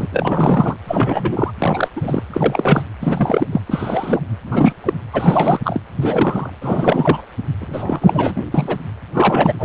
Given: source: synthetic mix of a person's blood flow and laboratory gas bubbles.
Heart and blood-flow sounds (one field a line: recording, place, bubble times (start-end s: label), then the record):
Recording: Doppler ultrasound of blood flow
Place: precordium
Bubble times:
0.00-0.08 s: bubbles
0.12-0.77 s: bubbles
0.87-1.51 s: bubbles
1.58-1.89 s: bubbles
1.96-2.23 s: bubbles
2.33-2.82 s: bubbles
3.01-3.47 s: bubbles
3.52-3.61 s: bubbles
3.66-4.21 s: bubbles
4.46-4.73 s: bubbles
4.83-4.93 s: bubbles
5.13-5.59 s: bubbles
5.63-5.81 s: bubbles
5.96-6.50 s: bubbles
6.61-7.25 s: bubbles
7.60-8.44 s: bubbles
8.54-8.77 s: bubbles
9.14-9.54 s: bubbles
9.59-9.65 s: bubbles
From the record:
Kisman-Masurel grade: 343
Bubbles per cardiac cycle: rolling drumbeat, 9 or more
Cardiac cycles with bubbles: 100%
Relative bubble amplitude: loud (0.450 to 0.775)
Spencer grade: 3 (all of the cardiac periods contain showers or single bubble signals, but not dominating or overriding the cardiac motion signals)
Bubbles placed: anywhere in the cardiac cycle